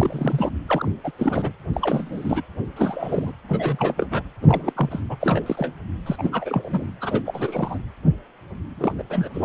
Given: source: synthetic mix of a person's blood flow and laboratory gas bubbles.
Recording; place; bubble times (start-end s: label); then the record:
Doppler ultrasound of blood flow; precordium
0.00-0.51 s: bubbles
0.67-0.91 s: bubbles
1.03-1.11 s: bubbles
1.19-1.51 s: bubbles
1.73-2.42 s: bubbles
2.76-3.33 s: bubbles
3.49-4.07 s: bubbles
4.11-4.23 s: bubbles
4.42-5.00 s: bubbles
5.09-5.17 s: bubbles
5.20-5.44 s: bubbles
5.46-5.73 s: bubbles
6.06-6.85 s: bubbles
7.00-7.21 s: bubbles
7.25-7.79 s: bubbles
8.77-8.94 s: bubbles
8.98-9.03 s: bubbles
9.09-9.29 s: bubbles
9.33-9.45 s: bubbles
From the record:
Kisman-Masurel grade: 332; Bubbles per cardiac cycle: rolling drumbeat, 9 or more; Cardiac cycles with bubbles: 50 to 99%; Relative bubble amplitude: moderate (0.250 to 0.450); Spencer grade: 3 (all of the cardiac periods contain showers or single bubble signals, but not dominating or overriding the cardiac motion signals); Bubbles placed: anywhere in the cardiac cycle